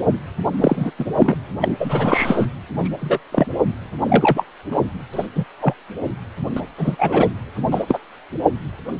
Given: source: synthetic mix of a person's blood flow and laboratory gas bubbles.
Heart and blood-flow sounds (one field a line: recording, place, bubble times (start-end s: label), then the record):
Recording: Doppler ultrasound of blood flow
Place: precordium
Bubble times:
0.60-0.91 s: bubbles
0.99-1.05 s: bubbles
1.20-1.35 s: bubbles
1.60-1.77 s: bubbles
1.79-2.46 s: bubbles
2.78-2.89 s: bubbles
3.01-3.19 s: bubbles
3.32-3.46 s: bubbles
4.04-4.44 s: bubbles
4.71-4.81 s: bubbles
5.12-5.28 s: bubbles
5.35-5.45 s: bubbles
5.62-5.74 s: bubbles
6.56-6.61 s: bubbles
6.77-6.96 s: bubbles
6.98-7.28 s: bubbles
7.71-7.83 s: bubbles
7.88-7.98 s: bubbles
From the record:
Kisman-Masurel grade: 233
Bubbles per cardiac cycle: several, 3 to 8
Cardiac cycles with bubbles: 50 to 99%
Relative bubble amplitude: loud (0.450 to 0.775)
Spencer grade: 3 (all of the cardiac periods contain showers or single bubble signals, but not dominating or overriding the cardiac motion signals)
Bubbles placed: anywhere in the cardiac cycle